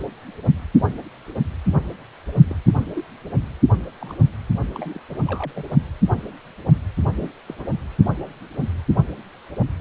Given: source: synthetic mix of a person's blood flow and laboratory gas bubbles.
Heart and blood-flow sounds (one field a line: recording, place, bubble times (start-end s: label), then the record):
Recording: Doppler ultrasound of blood flow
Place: precordium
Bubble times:
2.49-2.56 s: bubbles
2.67-2.73 s: bubbles
2.94-3.06 s: bubbles
4.00-4.16 s: bubbles
4.75-4.99 s: bubbles
5.09-5.21 s: bubbles
5.25-5.53 s: bubbles
5.55-5.64 s: bubbles
7.17-7.30 s: bubbles
7.46-7.64 s: bubbles
From the record:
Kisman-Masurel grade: 221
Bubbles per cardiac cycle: several, 3 to 8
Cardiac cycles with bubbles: 10 to 50%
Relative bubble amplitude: barely perceptible (0.100 to 0.250)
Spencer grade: 2 (many but less than half of the cardiac periods contain bubble signals, singularly or in groups)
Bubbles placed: only in the low amplitude regions of the cardiac cycle